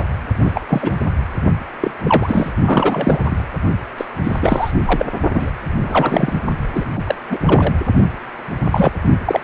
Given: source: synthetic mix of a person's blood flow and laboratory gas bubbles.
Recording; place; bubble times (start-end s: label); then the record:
Doppler ultrasound of blood flow; precordium
0.00-0.03 s: bubbles
0.45-0.61 s: bubbles
0.68-0.98 s: bubbles
1.80-1.91 s: bubbles
2.03-2.52 s: bubbles
2.65-3.44 s: bubbles
3.97-4.06 s: bubbles
4.23-4.71 s: bubbles
4.85-5.05 s: bubbles
5.34-5.50 s: bubbles
5.82-6.40 s: bubbles
6.75-6.84 s: bubbles
6.96-7.03 s: bubbles
7.06-7.15 s: bubbles
7.30-7.38 s: bubbles
7.46-7.74 s: bubbles
8.71-9.01 s: bubbles
9.25-9.41 s: bubbles
From the record:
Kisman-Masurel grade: 233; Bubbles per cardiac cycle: several, 3 to 8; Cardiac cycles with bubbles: 50 to 99%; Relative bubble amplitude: loud (0.450 to 0.775); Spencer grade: 3 (all of the cardiac periods contain showers or single bubble signals, but not dominating or overriding the cardiac motion signals); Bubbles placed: only in the low amplitude regions of the cardiac cycle